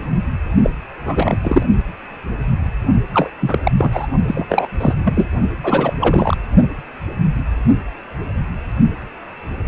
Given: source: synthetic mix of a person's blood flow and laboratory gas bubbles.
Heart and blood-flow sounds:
Doppler ultrasound of blood flow; precordium
0.62-0.70 s: bubbles
1.05-1.38 s: bubbles
1.43-1.62 s: bubbles
3.14-3.30 s: bubbles
3.41-3.58 s: bubbles
3.63-3.71 s: bubbles
3.77-4.07 s: bubbles
4.26-4.67 s: bubbles
4.80-4.95 s: bubbles
5.04-5.26 s: bubbles
5.63-5.93 s: bubbles
6.00-6.37 s: bubbles
From the record:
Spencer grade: 3 (all of the cardiac periods contain showers or single bubble signals, but not dominating or overriding the cardiac motion signals); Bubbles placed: only in the low amplitude regions of the cardiac cycle

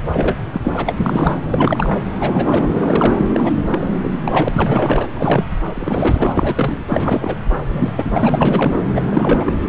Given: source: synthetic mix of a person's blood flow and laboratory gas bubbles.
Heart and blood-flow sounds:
Doppler ultrasound of blood flow; subclavian vein
0.13-0.61 s: bubbles
0.64-0.97 s: bubbles
1.02-1.39 s: bubbles
1.49-2.01 s: bubbles
2.19-2.70 s: bubbles
2.81-3.30 s: bubbles
3.34-3.54 s: bubbles
3.71-4.18 s: bubbles
4.24-4.48 s: bubbles
4.53-5.07 s: bubbles
5.13-5.45 s: bubbles
5.74-6.83 s: bubbles
6.88-7.36 s: bubbles
7.71-7.93 s: bubbles
7.96-8.74 s: bubbles
8.95-9.02 s: bubbles
9.11-9.54 s: bubbles
From the record:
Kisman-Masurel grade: 343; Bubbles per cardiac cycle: rolling drumbeat, 9 or more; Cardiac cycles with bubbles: 100%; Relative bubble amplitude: loud (0.450 to 0.775); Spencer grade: 3 (all of the cardiac periods contain showers or single bubble signals, but not dominating or overriding the cardiac motion signals); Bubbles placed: anywhere in the cardiac cycle

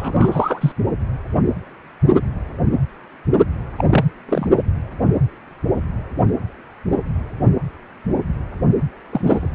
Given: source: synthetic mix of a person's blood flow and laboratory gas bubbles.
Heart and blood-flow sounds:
Doppler ultrasound of blood flow; precordium
0.00-0.72 s: bubbles
3.77-3.85 s: bubbles
3.89-4.05 s: bubbles
4.28-4.48 s: bubbles
9.09-9.51 s: bubbles
From the record:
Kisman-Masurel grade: 222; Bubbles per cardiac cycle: several, 3 to 8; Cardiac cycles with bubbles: 10 to 50%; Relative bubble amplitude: moderate (0.250 to 0.450); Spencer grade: 2 (many but less than half of the cardiac periods contain bubble signals, singularly or in groups); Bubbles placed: only in the low amplitude regions of the cardiac cycle

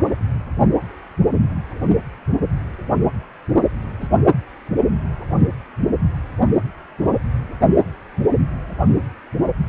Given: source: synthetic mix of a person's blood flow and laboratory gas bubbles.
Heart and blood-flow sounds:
Doppler ultrasound of blood flow; precordium
3.56-3.64 s: bubbles
4.00-4.08 s: bubbles
From the record:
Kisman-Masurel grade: 111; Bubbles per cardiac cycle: 1 to 2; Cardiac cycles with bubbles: 1 to 10%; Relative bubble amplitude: barely perceptible (0.100 to 0.250); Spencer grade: 1 (occasional bubble signal discernible with the cardiac motion signal, with majority of cardiac periods free of bubbles); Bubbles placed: only in the low amplitude regions of the cardiac cycle

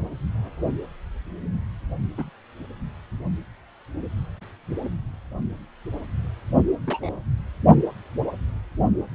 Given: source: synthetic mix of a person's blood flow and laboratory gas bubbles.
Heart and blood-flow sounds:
Doppler ultrasound of blood flow; precordium
2.17-2.29 s: bubbles
6.87-7.11 s: bubbles
From the record:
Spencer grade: 2 (many but less than half of the cardiac periods contain bubble signals, singularly or in groups); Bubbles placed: anywhere in the cardiac cycle

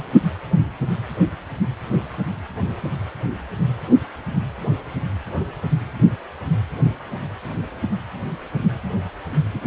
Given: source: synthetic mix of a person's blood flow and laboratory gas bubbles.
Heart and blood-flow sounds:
Doppler ultrasound of blood flow; precordium
0.00-0.04 s: bubbles
From the record:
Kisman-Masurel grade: 111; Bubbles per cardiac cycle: 1 to 2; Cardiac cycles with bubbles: 1 to 10%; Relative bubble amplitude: barely perceptible (0.100 to 0.250); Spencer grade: 1 (occasional bubble signal discernible with the cardiac motion signal, with majority of cardiac periods free of bubbles); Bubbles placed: anywhere in the cardiac cycle

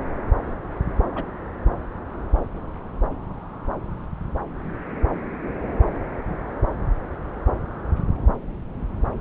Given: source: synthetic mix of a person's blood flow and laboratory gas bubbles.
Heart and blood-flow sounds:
Doppler ultrasound of blood flow; subclavian vein
1.15-1.24 s: bubbles
From the record:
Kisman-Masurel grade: 111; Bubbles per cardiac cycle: 1 to 2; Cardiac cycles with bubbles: 1 to 10%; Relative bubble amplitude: barely perceptible (0.100 to 0.250); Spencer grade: 1 (occasional bubble signal discernible with the cardiac motion signal, with majority of cardiac periods free of bubbles); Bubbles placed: anywhere in the cardiac cycle

